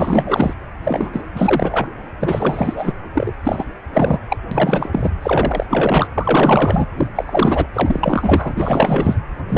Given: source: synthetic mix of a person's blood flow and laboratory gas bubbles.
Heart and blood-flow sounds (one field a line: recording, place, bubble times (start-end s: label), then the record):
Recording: Doppler ultrasound of blood flow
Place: precordium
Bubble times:
0.00-0.54 s: bubbles
0.83-1.10 s: bubbles
1.12-1.21 s: bubbles
1.34-1.87 s: bubbles
2.20-2.93 s: bubbles
3.14-3.33 s: bubbles
3.43-3.65 s: bubbles
3.92-4.19 s: bubbles
4.29-4.37 s: bubbles
4.51-4.90 s: bubbles
4.92-5.11 s: bubbles
5.22-5.66 s: bubbles
5.70-6.08 s: bubbles
6.17-6.87 s: bubbles
6.95-7.07 s: bubbles
7.15-7.67 s: bubbles
7.74-9.19 s: bubbles
9.48-9.58 s: bubbles
From the record:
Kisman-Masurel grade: 444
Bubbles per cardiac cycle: continuous sound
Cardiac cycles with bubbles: 100%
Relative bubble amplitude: maximal (0.775 to 0.999)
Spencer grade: 4 (maximum detectable bubble signal sounding continuously throughout systole and diastole of every cardiac period, and overriding the amplitude of the normal cardiac signals)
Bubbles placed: anywhere in the cardiac cycle